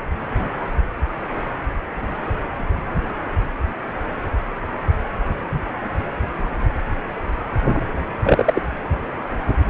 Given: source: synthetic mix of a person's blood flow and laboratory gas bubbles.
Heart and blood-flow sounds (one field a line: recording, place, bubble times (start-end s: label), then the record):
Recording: Doppler ultrasound of blood flow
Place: precordium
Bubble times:
8.23-8.64 s: bubbles
From the record:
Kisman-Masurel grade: 213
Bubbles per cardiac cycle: several, 3 to 8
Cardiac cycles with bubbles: 1 to 10%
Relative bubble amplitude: loud (0.450 to 0.775)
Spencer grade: 1 (occasional bubble signal discernible with the cardiac motion signal, with majority of cardiac periods free of bubbles)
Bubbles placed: anywhere in the cardiac cycle